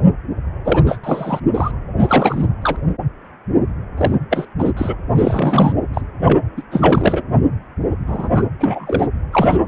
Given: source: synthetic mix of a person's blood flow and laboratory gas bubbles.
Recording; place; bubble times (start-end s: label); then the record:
Doppler ultrasound of blood flow; precordium
0.65-0.83 s: bubbles
0.86-0.98 s: bubbles
1.03-1.40 s: bubbles
1.54-1.71 s: bubbles
1.99-2.48 s: bubbles
2.61-2.77 s: bubbles
3.97-4.14 s: bubbles
4.30-4.46 s: bubbles
4.58-4.71 s: bubbles
4.76-4.96 s: bubbles
5.17-5.72 s: bubbles
5.93-6.01 s: bubbles
6.25-6.41 s: bubbles
6.57-6.62 s: bubbles
6.71-7.24 s: bubbles
8.07-8.29 s: bubbles
8.35-8.43 s: bubbles
8.59-9.08 s: bubbles
9.33-9.58 s: bubbles
From the record:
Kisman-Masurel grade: 333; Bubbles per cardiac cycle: rolling drumbeat, 9 or more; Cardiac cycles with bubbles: 50 to 99%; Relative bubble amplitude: loud (0.450 to 0.775); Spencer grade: 3 (all of the cardiac periods contain showers or single bubble signals, but not dominating or overriding the cardiac motion signals); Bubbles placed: anywhere in the cardiac cycle